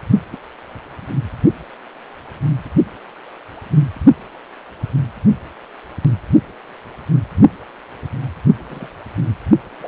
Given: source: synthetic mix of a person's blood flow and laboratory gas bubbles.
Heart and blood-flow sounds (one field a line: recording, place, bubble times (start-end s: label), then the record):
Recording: Doppler ultrasound of blood flow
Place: precordium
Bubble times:
0.32-0.36 s: bubbles
8.69-8.89 s: bubbles
9.79-9.88 s: bubbles
From the record:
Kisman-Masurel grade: 121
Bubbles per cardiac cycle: 1 to 2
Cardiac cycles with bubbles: 10 to 50%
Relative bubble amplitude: barely perceptible (0.100 to 0.250)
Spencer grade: 2 (many but less than half of the cardiac periods contain bubble signals, singularly or in groups)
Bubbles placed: only in the low amplitude regions of the cardiac cycle